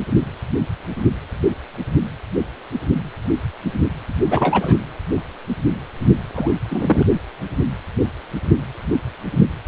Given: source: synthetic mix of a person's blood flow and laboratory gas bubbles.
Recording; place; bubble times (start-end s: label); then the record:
Doppler ultrasound of blood flow; precordium
4.30-4.78 s: bubbles
6.35-6.54 s: bubbles
6.68-7.06 s: bubbles
From the record:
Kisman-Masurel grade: 222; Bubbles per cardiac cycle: several, 3 to 8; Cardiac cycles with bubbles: 10 to 50%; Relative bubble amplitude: moderate (0.250 to 0.450); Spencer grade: 2 (many but less than half of the cardiac periods contain bubble signals, singularly or in groups); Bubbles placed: anywhere in the cardiac cycle